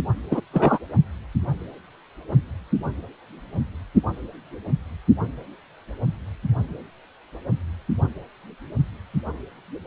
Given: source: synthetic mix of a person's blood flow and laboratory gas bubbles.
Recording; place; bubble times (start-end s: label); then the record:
Doppler ultrasound of blood flow; precordium
0.31-0.40 s: bubbles
0.53-0.78 s: bubbles
From the record:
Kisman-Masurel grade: 123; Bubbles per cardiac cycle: 1 to 2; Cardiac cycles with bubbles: 10 to 50%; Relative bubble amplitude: loud (0.450 to 0.775); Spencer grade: 2 (many but less than half of the cardiac periods contain bubble signals, singularly or in groups); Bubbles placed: only in the low amplitude regions of the cardiac cycle